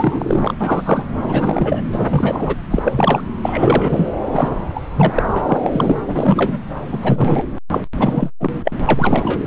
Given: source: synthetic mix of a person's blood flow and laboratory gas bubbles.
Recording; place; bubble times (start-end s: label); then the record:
Doppler ultrasound of blood flow; subclavian vein
0.00-0.53 s: bubbles
0.60-1.06 s: bubbles
1.17-1.80 s: bubbles
1.92-2.57 s: bubbles
2.70-3.21 s: bubbles
3.42-4.07 s: bubbles
4.31-4.49 s: bubbles
4.75-4.80 s: bubbles
4.96-5.23 s: bubbles
5.26-6.00 s: bubbles
6.07-6.59 s: bubbles
6.73-7.43 s: bubbles
7.71-7.80 s: bubbles
7.96-8.31 s: bubbles
8.40-8.51 s: bubbles
8.64-8.71 s: bubbles
8.88-9.39 s: bubbles
9.44-9.47 s: bubbles
From the record:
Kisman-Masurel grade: 333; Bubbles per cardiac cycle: rolling drumbeat, 9 or more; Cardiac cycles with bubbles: 50 to 99%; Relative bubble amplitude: loud (0.450 to 0.775); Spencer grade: 3 (all of the cardiac periods contain showers or single bubble signals, but not dominating or overriding the cardiac motion signals); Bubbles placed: anywhere in the cardiac cycle